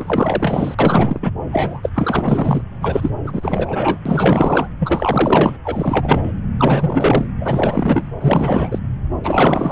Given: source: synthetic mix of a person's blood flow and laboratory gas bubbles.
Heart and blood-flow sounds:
Doppler ultrasound of blood flow; subclavian vein
0.00-0.74 s: bubbles
0.79-1.31 s: bubbles
1.52-1.90 s: bubbles
1.94-2.61 s: bubbles
2.81-3.10 s: bubbles
3.24-3.98 s: bubbles
4.05-4.68 s: bubbles
4.79-5.58 s: bubbles
5.64-6.33 s: bubbles
6.57-7.26 s: bubbles
7.41-8.10 s: bubbles
8.21-8.79 s: bubbles
9.23-9.72 s: bubbles
From the record:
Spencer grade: 4 (maximum detectable bubble signal sounding continuously throughout systole and diastole of every cardiac period, and overriding the amplitude of the normal cardiac signals); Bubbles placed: anywhere in the cardiac cycle

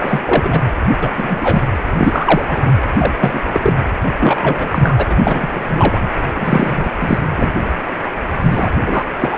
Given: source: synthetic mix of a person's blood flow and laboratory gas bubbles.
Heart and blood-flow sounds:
Doppler ultrasound of blood flow; precordium
0.00-0.20 s: bubbles
0.25-0.61 s: bubbles
1.01-1.09 s: bubbles
1.17-1.62 s: bubbles
1.97-2.74 s: bubbles
2.98-3.14 s: bubbles
3.19-3.40 s: bubbles
3.53-3.73 s: bubbles
4.19-5.06 s: bubbles
5.09-5.47 s: bubbles
5.51-6.10 s: bubbles
6.34-7.18 s: bubbles
7.35-7.52 s: bubbles
8.34-8.70 s: bubbles
8.81-9.05 s: bubbles
9.19-9.38 s: bubbles
From the record:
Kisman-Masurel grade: 233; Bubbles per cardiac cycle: several, 3 to 8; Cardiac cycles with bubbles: 50 to 99%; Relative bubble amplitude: loud (0.450 to 0.775); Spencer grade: 3 (all of the cardiac periods contain showers or single bubble signals, but not dominating or overriding the cardiac motion signals); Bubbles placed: anywhere in the cardiac cycle

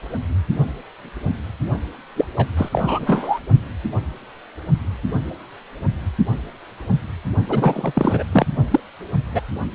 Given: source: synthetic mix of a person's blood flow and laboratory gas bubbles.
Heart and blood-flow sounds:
Doppler ultrasound of blood flow; precordium
2.16-2.25 s: bubbles
2.37-2.46 s: bubbles
2.56-2.69 s: bubbles
2.72-3.39 s: bubbles
7.48-7.92 s: bubbles
7.95-8.23 s: bubbles
8.31-8.46 s: bubbles
8.71-8.80 s: bubbles
9.33-9.41 s: bubbles
From the record:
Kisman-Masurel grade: 223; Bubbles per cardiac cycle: several, 3 to 8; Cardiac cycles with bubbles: 10 to 50%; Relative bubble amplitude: loud (0.450 to 0.775); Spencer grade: 2 (many but less than half of the cardiac periods contain bubble signals, singularly or in groups); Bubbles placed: only in the low amplitude regions of the cardiac cycle

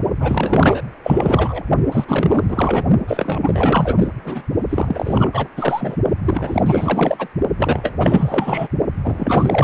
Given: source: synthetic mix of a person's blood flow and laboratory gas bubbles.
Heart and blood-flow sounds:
Doppler ultrasound of blood flow; precordium
0.20-0.82 s: bubbles
1.03-1.62 s: bubbles
1.92-2.05 s: bubbles
2.08-2.84 s: bubbles
3.08-3.95 s: bubbles
3.99-4.10 s: bubbles
4.24-4.42 s: bubbles
4.69-5.48 s: bubbles
5.56-5.96 s: bubbles
6.25-6.62 s: bubbles
6.65-7.28 s: bubbles
7.57-7.93 s: bubbles
7.98-8.68 s: bubbles
9.04-9.64 s: bubbles
From the record:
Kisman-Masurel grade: 444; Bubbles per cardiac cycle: continuous sound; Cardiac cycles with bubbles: 100%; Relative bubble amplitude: maximal (0.775 to 0.999); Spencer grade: 4 (maximum detectable bubble signal sounding continuously throughout systole and diastole of every cardiac period, and overriding the amplitude of the normal cardiac signals); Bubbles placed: only in the low amplitude regions of the cardiac cycle

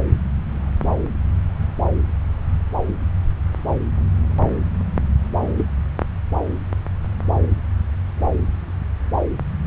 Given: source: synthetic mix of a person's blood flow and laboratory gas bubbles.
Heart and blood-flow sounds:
Doppler ultrasound of blood flow; subclavian vein
5.57-5.65 s: bubbles
From the record:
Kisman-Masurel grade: 112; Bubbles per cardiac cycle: 1 to 2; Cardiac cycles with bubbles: 1 to 10%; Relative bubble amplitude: moderate (0.250 to 0.450); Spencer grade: 1 (occasional bubble signal discernible with the cardiac motion signal, with majority of cardiac periods free of bubbles); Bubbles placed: anywhere in the cardiac cycle

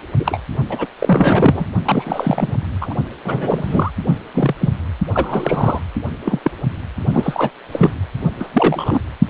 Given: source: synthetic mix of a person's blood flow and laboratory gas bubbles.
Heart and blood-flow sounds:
Doppler ultrasound of blood flow; precordium
0.17-0.38 s: bubbles
0.69-0.86 s: bubbles
1.00-1.66 s: bubbles
1.85-2.53 s: bubbles
2.81-2.95 s: bubbles
3.24-3.91 s: bubbles
4.09-4.19 s: bubbles
4.34-4.54 s: bubbles
4.61-4.70 s: bubbles
5.13-5.80 s: bubbles
6.24-6.39 s: bubbles
6.44-6.51 s: bubbles
7.13-7.49 s: bubbles
7.71-7.91 s: bubbles
8.39-8.48 s: bubbles
8.53-9.00 s: bubbles
From the record:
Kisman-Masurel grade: 243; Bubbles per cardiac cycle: several, 3 to 8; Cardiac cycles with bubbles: 100%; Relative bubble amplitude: loud (0.450 to 0.775); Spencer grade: 3 (all of the cardiac periods contain showers or single bubble signals, but not dominating or overriding the cardiac motion signals); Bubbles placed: only in the low amplitude regions of the cardiac cycle

